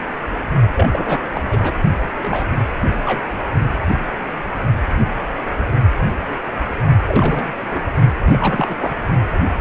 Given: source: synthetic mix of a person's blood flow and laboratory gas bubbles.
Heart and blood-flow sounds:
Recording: Doppler ultrasound of blood flow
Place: precordium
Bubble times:
0.76-1.41 s: bubbles
1.50-1.74 s: bubbles
2.21-2.49 s: bubbles
3.05-3.27 s: bubbles
7.08-7.80 s: bubbles
8.25-8.76 s: bubbles
8.79-8.96 s: bubbles
From the record:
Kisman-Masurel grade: 222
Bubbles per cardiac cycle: several, 3 to 8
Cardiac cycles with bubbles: 10 to 50%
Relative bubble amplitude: moderate (0.250 to 0.450)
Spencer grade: 2 (many but less than half of the cardiac periods contain bubble signals, singularly or in groups)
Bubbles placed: only in the low amplitude regions of the cardiac cycle

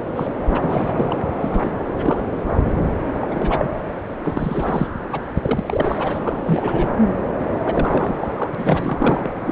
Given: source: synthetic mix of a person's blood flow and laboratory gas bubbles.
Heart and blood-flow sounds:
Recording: Doppler ultrasound of blood flow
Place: subclavian vein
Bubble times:
0.15-0.28 s: bubbles
0.50-1.18 s: bubbles
1.40-1.71 s: bubbles
1.91-2.20 s: bubbles
2.66-2.73 s: bubbles
2.76-3.06 s: bubbles
3.14-3.69 s: bubbles
4.22-4.88 s: bubbles
5.11-5.19 s: bubbles
5.36-6.19 s: bubbles
6.23-6.36 s: bubbles
6.45-6.90 s: bubbles
7.66-9.33 s: bubbles
9.40-9.52 s: bubbles
From the record:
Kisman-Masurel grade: 342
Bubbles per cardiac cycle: rolling drumbeat, 9 or more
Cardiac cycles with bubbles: 100%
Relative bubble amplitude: moderate (0.250 to 0.450)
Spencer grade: 3 (all of the cardiac periods contain showers or single bubble signals, but not dominating or overriding the cardiac motion signals)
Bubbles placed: anywhere in the cardiac cycle

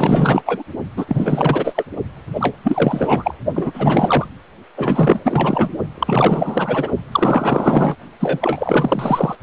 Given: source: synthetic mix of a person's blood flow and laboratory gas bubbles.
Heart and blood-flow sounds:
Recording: Doppler ultrasound of blood flow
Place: precordium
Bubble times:
0.00-0.43 s: bubbles
0.45-0.63 s: bubbles
0.96-1.83 s: bubbles
2.33-2.56 s: bubbles
2.63-3.35 s: bubbles
3.54-4.28 s: bubbles
4.76-5.20 s: bubbles
5.24-5.69 s: bubbles
5.94-6.92 s: bubbles
7.12-7.96 s: bubbles
8.19-9.36 s: bubbles
From the record:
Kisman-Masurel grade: 444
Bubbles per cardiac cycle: continuous sound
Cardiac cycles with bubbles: 100%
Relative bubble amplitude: maximal (0.775 to 0.999)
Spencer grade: 4 (maximum detectable bubble signal sounding continuously throughout systole and diastole of every cardiac period, and overriding the amplitude of the normal cardiac signals)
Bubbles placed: only in the low amplitude regions of the cardiac cycle

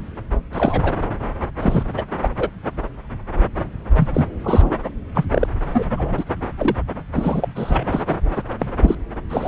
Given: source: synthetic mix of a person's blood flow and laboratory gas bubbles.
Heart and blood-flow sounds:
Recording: Doppler ultrasound of blood flow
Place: subclavian vein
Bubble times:
0.53-0.94 s: bubbles
1.59-1.83 s: bubbles
1.97-2.04 s: bubbles
2.21-2.29 s: bubbles
2.38-2.49 s: bubbles
3.95-4.25 s: bubbles
4.43-4.77 s: bubbles
4.84-4.89 s: bubbles
5.14-5.25 s: bubbles
5.31-5.47 s: bubbles
5.73-5.84 s: bubbles
5.97-6.25 s: bubbles
6.57-6.77 s: bubbles
7.14-7.86 s: bubbles
7.91-8.03 s: bubbles
8.08-8.16 s: bubbles
8.36-8.43 s: bubbles
8.59-8.66 s: bubbles
8.82-8.96 s: bubbles
9.29-9.48 s: bubbles
From the record:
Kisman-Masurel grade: 242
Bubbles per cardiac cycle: several, 3 to 8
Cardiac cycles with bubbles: 100%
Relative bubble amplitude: moderate (0.250 to 0.450)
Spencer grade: 3 (all of the cardiac periods contain showers or single bubble signals, but not dominating or overriding the cardiac motion signals)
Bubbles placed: anywhere in the cardiac cycle

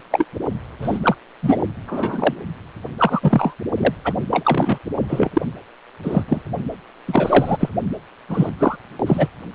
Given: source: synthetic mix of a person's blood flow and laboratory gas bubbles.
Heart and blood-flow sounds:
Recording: Doppler ultrasound of blood flow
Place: precordium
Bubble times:
0.11-0.25 s: bubbles
0.81-0.99 s: bubbles
1.02-1.15 s: bubbles
1.42-1.63 s: bubbles
1.87-2.34 s: bubbles
2.98-3.54 s: bubbles
3.77-3.94 s: bubbles
4.04-4.13 s: bubbles
4.31-4.79 s: bubbles
5.08-5.30 s: bubbles
5.33-5.42 s: bubbles
6.03-6.24 s: bubbles
6.28-6.41 s: bubbles
7.07-7.57 s: bubbles
7.60-7.69 s: bubbles
8.29-8.49 s: bubbles
8.58-8.76 s: bubbles
9.06-9.27 s: bubbles
9.53-9.55 s: bubbles
From the record:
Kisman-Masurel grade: 243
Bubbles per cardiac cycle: several, 3 to 8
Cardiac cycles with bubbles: 100%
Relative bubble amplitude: loud (0.450 to 0.775)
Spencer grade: 3 (all of the cardiac periods contain showers or single bubble signals, but not dominating or overriding the cardiac motion signals)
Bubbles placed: only in the low amplitude regions of the cardiac cycle

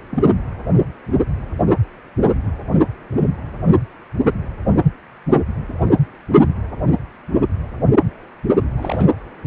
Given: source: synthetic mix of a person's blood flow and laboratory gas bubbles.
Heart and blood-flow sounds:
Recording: Doppler ultrasound of blood flow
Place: precordium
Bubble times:
0.11-0.30 s: bubbles
8.77-9.06 s: bubbles
From the record:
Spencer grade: 1 (occasional bubble signal discernible with the cardiac motion signal, with majority of cardiac periods free of bubbles)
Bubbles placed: anywhere in the cardiac cycle

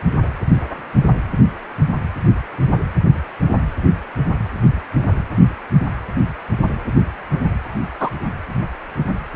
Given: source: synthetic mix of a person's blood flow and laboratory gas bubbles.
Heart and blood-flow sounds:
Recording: Doppler ultrasound of blood flow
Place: precordium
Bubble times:
8.00-8.10 s: bubbles
From the record:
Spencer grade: 1 (occasional bubble signal discernible with the cardiac motion signal, with majority of cardiac periods free of bubbles)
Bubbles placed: anywhere in the cardiac cycle

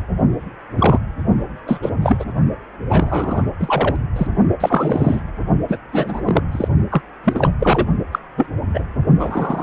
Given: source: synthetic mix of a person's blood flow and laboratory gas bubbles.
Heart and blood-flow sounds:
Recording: Doppler ultrasound of blood flow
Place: precordium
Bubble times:
0.76-0.99 s: bubbles
1.66-1.90 s: bubbles
2.02-2.25 s: bubbles
2.89-3.42 s: bubbles
3.59-3.96 s: bubbles
4.16-4.27 s: bubbles
4.60-5.22 s: bubbles
5.68-5.79 s: bubbles
5.92-6.22 s: bubbles
6.26-6.41 s: bubbles
6.52-6.68 s: bubbles
6.91-7.01 s: bubbles
7.24-7.51 s: bubbles
7.60-7.87 s: bubbles
8.12-8.19 s: bubbles
8.37-8.46 s: bubbles
8.73-8.85 s: bubbles
9.19-9.63 s: bubbles
From the record:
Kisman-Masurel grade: 233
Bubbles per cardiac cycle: several, 3 to 8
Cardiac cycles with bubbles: 50 to 99%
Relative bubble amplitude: loud (0.450 to 0.775)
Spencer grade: 3 (all of the cardiac periods contain showers or single bubble signals, but not dominating or overriding the cardiac motion signals)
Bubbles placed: only in the low amplitude regions of the cardiac cycle

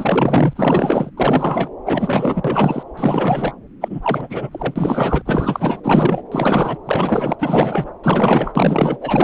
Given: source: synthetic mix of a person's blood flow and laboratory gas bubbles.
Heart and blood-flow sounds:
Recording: Doppler ultrasound of blood flow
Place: subclavian vein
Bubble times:
0.00-1.10 s: bubbles
1.17-1.70 s: bubbles
1.85-2.83 s: bubbles
2.97-3.54 s: bubbles
3.81-5.22 s: bubbles
5.25-5.80 s: bubbles
5.83-6.22 s: bubbles
6.31-6.78 s: bubbles
6.85-7.36 s: bubbles
7.39-7.90 s: bubbles
8.03-9.24 s: bubbles
From the record:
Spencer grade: 4 (maximum detectable bubble signal sounding continuously throughout systole and diastole of every cardiac period, and overriding the amplitude of the normal cardiac signals)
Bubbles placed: anywhere in the cardiac cycle

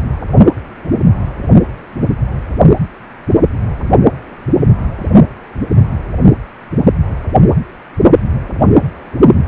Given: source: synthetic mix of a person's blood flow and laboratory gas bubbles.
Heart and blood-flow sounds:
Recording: Doppler ultrasound of blood flow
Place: precordium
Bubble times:
no bubbles
From the record:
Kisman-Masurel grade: 000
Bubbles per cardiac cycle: 0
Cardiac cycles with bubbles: 0%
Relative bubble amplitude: no bubbles discernible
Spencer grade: 0 (complete lack of bubble signals)

